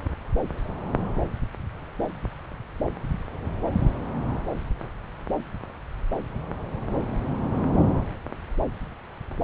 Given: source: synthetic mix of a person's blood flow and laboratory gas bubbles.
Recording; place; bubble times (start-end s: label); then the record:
Doppler ultrasound of blood flow; subclavian vein
no bubbles
From the record:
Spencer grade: 0 (complete lack of bubble signals)